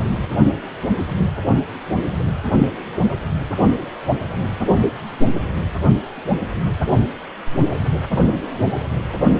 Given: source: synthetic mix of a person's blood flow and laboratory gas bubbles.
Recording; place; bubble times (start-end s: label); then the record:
Doppler ultrasound of blood flow; precordium
1.17-1.24 s: bubbles
From the record:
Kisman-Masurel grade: 111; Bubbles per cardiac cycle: 1 to 2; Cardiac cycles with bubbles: 1 to 10%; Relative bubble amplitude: barely perceptible (0.100 to 0.250); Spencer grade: 1 (occasional bubble signal discernible with the cardiac motion signal, with majority of cardiac periods free of bubbles); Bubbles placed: only in the low amplitude regions of the cardiac cycle